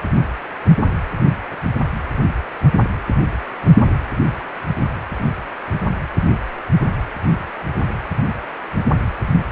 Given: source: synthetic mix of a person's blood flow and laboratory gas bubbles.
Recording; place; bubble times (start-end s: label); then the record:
Doppler ultrasound of blood flow; precordium
no bubbles
From the record:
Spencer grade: 0 (complete lack of bubble signals)